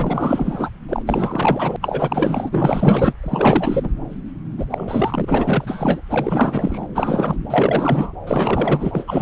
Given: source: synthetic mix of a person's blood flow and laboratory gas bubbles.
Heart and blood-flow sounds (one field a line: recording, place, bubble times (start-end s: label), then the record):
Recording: Doppler ultrasound of blood flow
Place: subclavian vein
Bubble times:
0.00-0.70 s: bubbles
0.89-1.02 s: bubbles
1.05-1.76 s: bubbles
1.81-3.13 s: bubbles
3.22-3.90 s: bubbles
4.57-4.65 s: bubbles
4.70-6.01 s: bubbles
6.10-6.87 s: bubbles
6.94-7.36 s: bubbles
7.50-8.12 s: bubbles
8.27-9.04 s: bubbles
9.07-9.22 s: bubbles
From the record:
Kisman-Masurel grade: 444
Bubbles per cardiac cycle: continuous sound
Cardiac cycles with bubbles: 100%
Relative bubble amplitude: maximal (0.775 to 0.999)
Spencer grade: 4 (maximum detectable bubble signal sounding continuously throughout systole and diastole of every cardiac period, and overriding the amplitude of the normal cardiac signals)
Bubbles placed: anywhere in the cardiac cycle